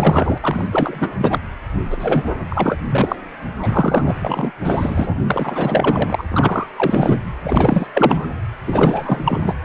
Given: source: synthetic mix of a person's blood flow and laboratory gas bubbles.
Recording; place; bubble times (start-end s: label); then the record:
Doppler ultrasound of blood flow; precordium
0.00-0.38 s: bubbles
0.44-0.69 s: bubbles
0.71-1.39 s: bubbles
1.90-1.98 s: bubbles
2.00-2.31 s: bubbles
2.50-2.77 s: bubbles
2.90-3.16 s: bubbles
3.62-4.14 s: bubbles
4.20-4.51 s: bubbles
4.63-5.16 s: bubbles
5.29-6.24 s: bubbles
6.30-6.67 s: bubbles
6.76-7.19 s: bubbles
7.45-7.87 s: bubbles
7.93-8.27 s: bubbles
8.66-9.54 s: bubbles
9.62-9.65 s: bubbles
From the record:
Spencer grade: 4 (maximum detectable bubble signal sounding continuously throughout systole and diastole of every cardiac period, and overriding the amplitude of the normal cardiac signals); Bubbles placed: anywhere in the cardiac cycle